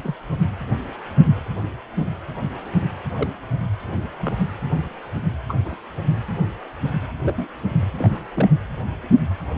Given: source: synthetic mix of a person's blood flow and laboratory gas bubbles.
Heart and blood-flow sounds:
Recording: Doppler ultrasound of blood flow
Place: precordium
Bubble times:
0.04-0.15 s: bubbles
3.16-3.27 s: bubbles
4.21-4.36 s: bubbles
5.48-5.55 s: bubbles
5.64-5.76 s: bubbles
7.23-7.47 s: bubbles
7.98-8.20 s: bubbles
8.36-8.48 s: bubbles
From the record:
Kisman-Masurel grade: 121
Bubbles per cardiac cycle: 1 to 2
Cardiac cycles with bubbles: 10 to 50%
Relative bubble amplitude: barely perceptible (0.100 to 0.250)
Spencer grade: 2 (many but less than half of the cardiac periods contain bubble signals, singularly or in groups)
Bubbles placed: anywhere in the cardiac cycle

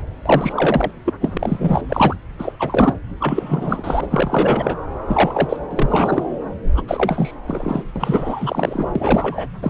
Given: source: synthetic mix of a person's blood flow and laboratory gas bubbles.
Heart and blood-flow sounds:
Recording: Doppler ultrasound of blood flow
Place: subclavian vein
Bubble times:
0.26-0.91 s: bubbles
1.05-1.13 s: bubbles
1.21-1.81 s: bubbles
1.89-2.17 s: bubbles
2.39-2.52 s: bubbles
2.59-2.94 s: bubbles
3.20-4.07 s: bubbles
4.10-4.76 s: bubbles
5.07-5.58 s: bubbles
5.71-6.23 s: bubbles
6.75-6.83 s: bubbles
6.88-7.34 s: bubbles
7.46-7.83 s: bubbles
7.96-8.85 s: bubbles
8.95-9.47 s: bubbles
9.62-9.70 s: bubbles
From the record:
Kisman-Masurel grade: 333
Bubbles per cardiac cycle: rolling drumbeat, 9 or more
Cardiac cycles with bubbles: 50 to 99%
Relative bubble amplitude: loud (0.450 to 0.775)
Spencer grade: 3 (all of the cardiac periods contain showers or single bubble signals, but not dominating or overriding the cardiac motion signals)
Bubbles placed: anywhere in the cardiac cycle

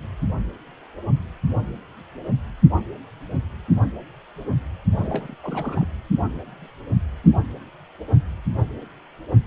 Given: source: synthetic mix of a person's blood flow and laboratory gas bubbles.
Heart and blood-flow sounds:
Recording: Doppler ultrasound of blood flow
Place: precordium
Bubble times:
4.98-5.35 s: bubbles
5.42-5.88 s: bubbles
From the record:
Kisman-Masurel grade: 211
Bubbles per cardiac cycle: several, 3 to 8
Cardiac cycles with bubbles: 1 to 10%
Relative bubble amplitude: barely perceptible (0.100 to 0.250)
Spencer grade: 1 (occasional bubble signal discernible with the cardiac motion signal, with majority of cardiac periods free of bubbles)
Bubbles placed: anywhere in the cardiac cycle

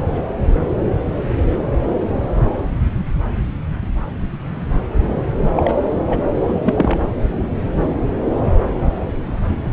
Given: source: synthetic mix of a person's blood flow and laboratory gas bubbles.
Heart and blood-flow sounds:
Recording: Doppler ultrasound of blood flow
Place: subclavian vein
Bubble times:
5.40-5.75 s: bubbles
6.07-6.20 s: bubbles
6.35-6.54 s: bubbles
6.64-7.00 s: bubbles
From the record:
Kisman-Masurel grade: 222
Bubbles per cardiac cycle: several, 3 to 8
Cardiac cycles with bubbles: 10 to 50%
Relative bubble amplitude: moderate (0.250 to 0.450)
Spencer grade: 2 (many but less than half of the cardiac periods contain bubble signals, singularly or in groups)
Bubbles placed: anywhere in the cardiac cycle

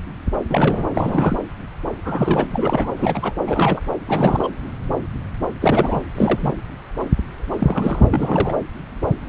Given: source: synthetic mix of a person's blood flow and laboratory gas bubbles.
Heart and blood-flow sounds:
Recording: Doppler ultrasound of blood flow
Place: subclavian vein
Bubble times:
0.49-0.88 s: bubbles
0.93-1.38 s: bubbles
2.05-2.93 s: bubbles
2.99-3.33 s: bubbles
3.47-3.81 s: bubbles
4.05-4.48 s: bubbles
5.60-6.00 s: bubbles
6.15-6.52 s: bubbles
7.59-8.04 s: bubbles
8.10-8.57 s: bubbles
From the record:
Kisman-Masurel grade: 332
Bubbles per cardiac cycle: rolling drumbeat, 9 or more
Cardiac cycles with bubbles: 50 to 99%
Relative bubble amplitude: moderate (0.250 to 0.450)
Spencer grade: 3 (all of the cardiac periods contain showers or single bubble signals, but not dominating or overriding the cardiac motion signals)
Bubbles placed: anywhere in the cardiac cycle

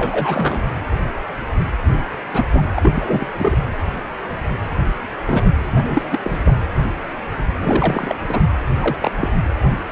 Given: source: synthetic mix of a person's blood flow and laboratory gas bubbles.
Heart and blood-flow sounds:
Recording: Doppler ultrasound of blood flow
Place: precordium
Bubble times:
0.00-0.64 s: bubbles
2.33-2.46 s: bubbles
2.53-2.62 s: bubbles
2.74-3.28 s: bubbles
3.38-3.56 s: bubbles
5.26-5.50 s: bubbles
5.74-6.08 s: bubbles
6.11-6.20 s: bubbles
6.24-6.56 s: bubbles
7.58-8.15 s: bubbles
8.29-8.40 s: bubbles
8.80-8.97 s: bubbles
9.02-9.11 s: bubbles
9.17-9.31 s: bubbles
From the record:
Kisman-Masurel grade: 232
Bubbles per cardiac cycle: several, 3 to 8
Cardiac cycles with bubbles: 50 to 99%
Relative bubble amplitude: moderate (0.250 to 0.450)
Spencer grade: 3 (all of the cardiac periods contain showers or single bubble signals, but not dominating or overriding the cardiac motion signals)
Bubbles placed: anywhere in the cardiac cycle

